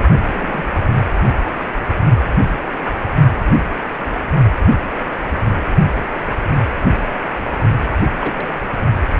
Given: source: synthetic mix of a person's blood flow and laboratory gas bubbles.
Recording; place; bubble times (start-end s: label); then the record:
Doppler ultrasound of blood flow; precordium
0.27-0.64 s: bubbles
2.85-2.99 s: bubbles
8.20-8.60 s: bubbles
From the record:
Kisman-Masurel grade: 121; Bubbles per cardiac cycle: 1 to 2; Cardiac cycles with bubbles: 10 to 50%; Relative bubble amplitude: barely perceptible (0.100 to 0.250); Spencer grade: 2 (many but less than half of the cardiac periods contain bubble signals, singularly or in groups); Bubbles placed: only in the low amplitude regions of the cardiac cycle